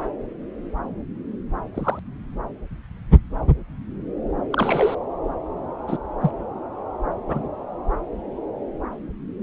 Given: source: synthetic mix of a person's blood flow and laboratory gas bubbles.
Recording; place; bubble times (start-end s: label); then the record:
Doppler ultrasound of blood flow; subclavian vein
1.74-2.00 s: bubbles
4.51-4.95 s: bubbles
5.88-5.97 s: bubbles
6.21-6.31 s: bubbles
7.28-7.47 s: bubbles
From the record:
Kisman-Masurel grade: 122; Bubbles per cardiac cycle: 1 to 2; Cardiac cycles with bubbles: 10 to 50%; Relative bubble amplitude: moderate (0.250 to 0.450); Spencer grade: 2 (many but less than half of the cardiac periods contain bubble signals, singularly or in groups); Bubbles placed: anywhere in the cardiac cycle